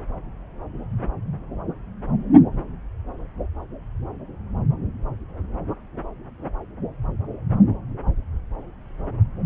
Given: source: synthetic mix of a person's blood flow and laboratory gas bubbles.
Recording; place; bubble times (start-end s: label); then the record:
Doppler ultrasound of blood flow; subclavian vein
no bubbles
From the record:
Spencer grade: 0 (complete lack of bubble signals)